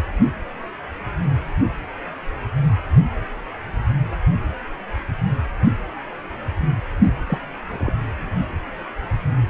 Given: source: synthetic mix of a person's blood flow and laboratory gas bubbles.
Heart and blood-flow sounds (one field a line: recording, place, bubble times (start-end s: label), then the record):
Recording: Doppler ultrasound of blood flow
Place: precordium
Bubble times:
7.26-7.38 s: bubbles
7.68-7.91 s: bubbles
From the record:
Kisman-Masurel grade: 111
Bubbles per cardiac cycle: 1 to 2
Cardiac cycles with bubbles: 1 to 10%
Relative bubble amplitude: barely perceptible (0.100 to 0.250)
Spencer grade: 1 (occasional bubble signal discernible with the cardiac motion signal, with majority of cardiac periods free of bubbles)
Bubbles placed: anywhere in the cardiac cycle